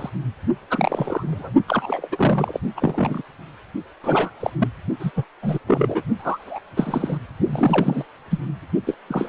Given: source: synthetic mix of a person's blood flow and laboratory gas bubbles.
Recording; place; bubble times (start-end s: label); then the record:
Doppler ultrasound of blood flow; precordium
0.00-0.09 s: bubbles
0.70-1.51 s: bubbles
1.68-2.08 s: bubbles
2.12-2.60 s: bubbles
2.76-3.22 s: bubbles
4.04-4.30 s: bubbles
4.40-4.50 s: bubbles
4.58-4.68 s: bubbles
4.99-5.11 s: bubbles
5.16-5.25 s: bubbles
5.42-5.58 s: bubbles
5.67-6.03 s: bubbles
6.18-6.60 s: bubbles
6.76-7.17 s: bubbles
7.46-8.06 s: bubbles
8.30-8.40 s: bubbles
8.87-8.95 s: bubbles
9.07-9.29 s: bubbles
From the record:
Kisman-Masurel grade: 243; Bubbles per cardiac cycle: several, 3 to 8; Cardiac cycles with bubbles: 100%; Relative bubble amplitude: loud (0.450 to 0.775); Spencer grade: 3 (all of the cardiac periods contain showers or single bubble signals, but not dominating or overriding the cardiac motion signals); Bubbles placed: only in the low amplitude regions of the cardiac cycle